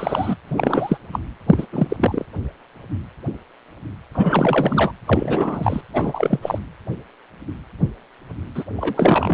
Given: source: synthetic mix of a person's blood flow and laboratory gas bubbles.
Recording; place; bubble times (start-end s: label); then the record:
Doppler ultrasound of blood flow; precordium
0.00-0.35 s: bubbles
0.47-0.97 s: bubbles
1.12-1.20 s: bubbles
1.47-1.67 s: bubbles
1.72-2.26 s: bubbles
4.14-4.92 s: bubbles
5.06-5.81 s: bubbles
5.93-6.39 s: bubbles
6.42-6.58 s: bubbles
8.54-8.64 s: bubbles
8.76-9.33 s: bubbles
From the record:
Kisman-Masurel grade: 333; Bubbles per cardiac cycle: rolling drumbeat, 9 or more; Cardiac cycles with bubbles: 50 to 99%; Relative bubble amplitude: loud (0.450 to 0.775); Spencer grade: 3 (all of the cardiac periods contain showers or single bubble signals, but not dominating or overriding the cardiac motion signals); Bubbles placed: anywhere in the cardiac cycle